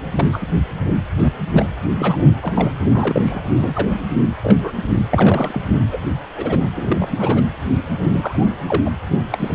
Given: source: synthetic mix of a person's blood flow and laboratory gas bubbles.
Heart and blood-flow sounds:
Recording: Doppler ultrasound of blood flow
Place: precordium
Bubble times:
0.15-0.26 s: bubbles
0.32-0.47 s: bubbles
1.16-1.34 s: bubbles
1.53-1.66 s: bubbles
1.98-2.29 s: bubbles
2.42-2.74 s: bubbles
2.91-3.41 s: bubbles
3.44-3.98 s: bubbles
4.42-4.58 s: bubbles
4.62-4.72 s: bubbles
5.11-5.61 s: bubbles
5.92-5.98 s: bubbles
6.36-6.58 s: bubbles
6.75-7.42 s: bubbles
8.12-8.49 s: bubbles
8.66-8.82 s: bubbles
8.85-8.90 s: bubbles
9.31-9.55 s: bubbles
From the record:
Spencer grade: 3 (all of the cardiac periods contain showers or single bubble signals, but not dominating or overriding the cardiac motion signals)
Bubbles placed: anywhere in the cardiac cycle

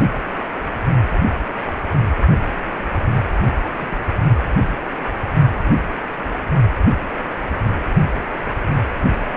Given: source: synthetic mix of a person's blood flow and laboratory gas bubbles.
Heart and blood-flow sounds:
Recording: Doppler ultrasound of blood flow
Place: precordium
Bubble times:
3.76-4.00 s: bubbles
From the record:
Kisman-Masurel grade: 111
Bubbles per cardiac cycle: 1 to 2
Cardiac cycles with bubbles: 1 to 10%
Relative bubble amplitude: barely perceptible (0.100 to 0.250)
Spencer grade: 1 (occasional bubble signal discernible with the cardiac motion signal, with majority of cardiac periods free of bubbles)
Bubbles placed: only in the low amplitude regions of the cardiac cycle

